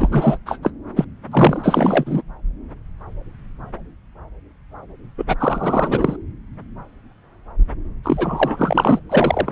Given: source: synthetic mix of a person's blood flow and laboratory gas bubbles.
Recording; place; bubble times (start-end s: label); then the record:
Doppler ultrasound of blood flow; subclavian vein
0.00-0.38 s: bubbles
0.46-0.57 s: bubbles
0.62-0.71 s: bubbles
0.96-1.04 s: bubbles
1.31-2.22 s: bubbles
5.17-5.24 s: bubbles
5.28-5.35 s: bubbles
5.39-6.17 s: bubbles
8.04-9.00 s: bubbles
9.09-9.52 s: bubbles
From the record:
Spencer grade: 3 (all of the cardiac periods contain showers or single bubble signals, but not dominating or overriding the cardiac motion signals); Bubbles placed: anywhere in the cardiac cycle